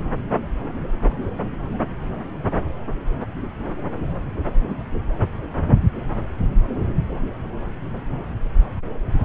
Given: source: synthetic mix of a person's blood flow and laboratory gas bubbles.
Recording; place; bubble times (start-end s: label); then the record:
Doppler ultrasound of blood flow; subclavian vein
no bubbles
From the record:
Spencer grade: 0 (complete lack of bubble signals)